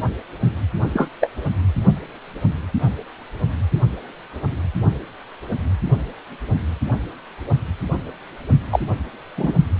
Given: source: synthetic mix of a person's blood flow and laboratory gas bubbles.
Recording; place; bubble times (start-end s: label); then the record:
Doppler ultrasound of blood flow; precordium
0.93-1.08 s: bubbles
1.21-1.29 s: bubbles
8.70-8.79 s: bubbles
9.37-9.53 s: bubbles
From the record:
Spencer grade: 2 (many but less than half of the cardiac periods contain bubble signals, singularly or in groups); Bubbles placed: only in the low amplitude regions of the cardiac cycle